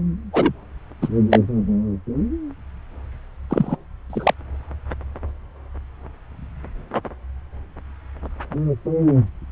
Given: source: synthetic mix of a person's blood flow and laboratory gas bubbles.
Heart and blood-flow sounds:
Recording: Doppler ultrasound of blood flow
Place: subclavian vein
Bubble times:
0.33-0.53 s: bubbles
1.01-1.08 s: bubbles
1.30-1.39 s: bubbles
3.50-3.77 s: bubbles
4.09-4.34 s: bubbles
From the record:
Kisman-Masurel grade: 123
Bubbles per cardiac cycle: 1 to 2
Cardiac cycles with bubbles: 10 to 50%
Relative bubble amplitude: loud (0.450 to 0.775)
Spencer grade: 2 (many but less than half of the cardiac periods contain bubble signals, singularly or in groups)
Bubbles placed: anywhere in the cardiac cycle

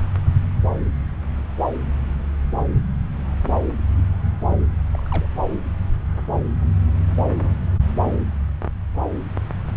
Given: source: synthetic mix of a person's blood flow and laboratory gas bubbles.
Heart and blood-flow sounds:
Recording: Doppler ultrasound of blood flow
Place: subclavian vein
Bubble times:
3.97-4.02 s: bubbles
4.50-4.55 s: bubbles
4.95-5.01 s: bubbles
5.11-5.27 s: bubbles
5.34-5.58 s: bubbles
From the record:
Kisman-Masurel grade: 121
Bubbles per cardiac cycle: 1 to 2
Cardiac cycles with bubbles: 10 to 50%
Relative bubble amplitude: barely perceptible (0.100 to 0.250)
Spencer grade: 2 (many but less than half of the cardiac periods contain bubble signals, singularly or in groups)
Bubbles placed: anywhere in the cardiac cycle

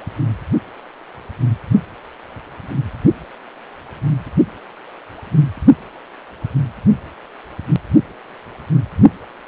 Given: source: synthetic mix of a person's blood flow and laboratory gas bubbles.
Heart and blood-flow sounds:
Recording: Doppler ultrasound of blood flow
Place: precordium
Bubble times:
no bubbles
From the record:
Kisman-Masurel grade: 000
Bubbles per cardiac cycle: 0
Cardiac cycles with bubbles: 0%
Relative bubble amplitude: no bubbles discernible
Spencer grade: 0 (complete lack of bubble signals)

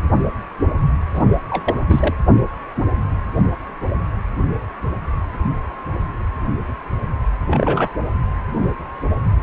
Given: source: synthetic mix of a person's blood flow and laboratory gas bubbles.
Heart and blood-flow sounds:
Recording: Doppler ultrasound of blood flow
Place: precordium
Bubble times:
1.13-1.23 s: bubbles
1.50-1.75 s: bubbles
1.89-2.14 s: bubbles
7.46-7.91 s: bubbles
From the record:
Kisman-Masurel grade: 222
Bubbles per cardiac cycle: several, 3 to 8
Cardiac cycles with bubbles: 10 to 50%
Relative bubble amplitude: moderate (0.250 to 0.450)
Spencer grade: 2 (many but less than half of the cardiac periods contain bubble signals, singularly or in groups)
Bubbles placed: anywhere in the cardiac cycle

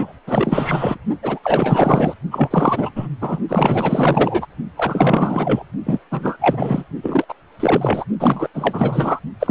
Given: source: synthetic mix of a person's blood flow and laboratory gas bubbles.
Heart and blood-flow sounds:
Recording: Doppler ultrasound of blood flow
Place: precordium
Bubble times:
0.00-0.12 s: bubbles
0.27-0.98 s: bubbles
1.23-1.39 s: bubbles
1.43-2.14 s: bubbles
2.30-2.91 s: bubbles
2.95-3.08 s: bubbles
3.21-3.40 s: bubbles
3.49-4.46 s: bubbles
4.75-5.63 s: bubbles
5.86-6.00 s: bubbles
6.11-6.37 s: bubbles
6.40-6.84 s: bubbles
7.03-7.25 s: bubbles
7.29-7.35 s: bubbles
7.60-8.04 s: bubbles
8.20-8.48 s: bubbles
8.54-9.20 s: bubbles
9.39-9.51 s: bubbles
From the record:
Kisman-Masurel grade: 444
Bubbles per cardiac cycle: continuous sound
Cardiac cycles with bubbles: 100%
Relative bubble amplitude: maximal (0.775 to 0.999)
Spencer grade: 4 (maximum detectable bubble signal sounding continuously throughout systole and diastole of every cardiac period, and overriding the amplitude of the normal cardiac signals)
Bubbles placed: only in the low amplitude regions of the cardiac cycle

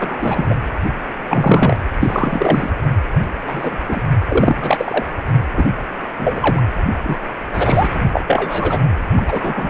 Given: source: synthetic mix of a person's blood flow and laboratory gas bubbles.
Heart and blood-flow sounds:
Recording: Doppler ultrasound of blood flow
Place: precordium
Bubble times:
0.00-0.55 s: bubbles
1.27-1.76 s: bubbles
2.00-2.70 s: bubbles
3.46-3.76 s: bubbles
3.88-4.01 s: bubbles
4.28-5.05 s: bubbles
5.57-5.71 s: bubbles
6.18-6.60 s: bubbles
7.04-7.17 s: bubbles
7.54-7.99 s: bubbles
8.12-8.21 s: bubbles
8.27-8.80 s: bubbles
9.16-9.70 s: bubbles
From the record:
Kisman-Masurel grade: 243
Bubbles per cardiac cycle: several, 3 to 8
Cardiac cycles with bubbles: 100%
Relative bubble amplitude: loud (0.450 to 0.775)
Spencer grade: 3 (all of the cardiac periods contain showers or single bubble signals, but not dominating or overriding the cardiac motion signals)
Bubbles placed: anywhere in the cardiac cycle

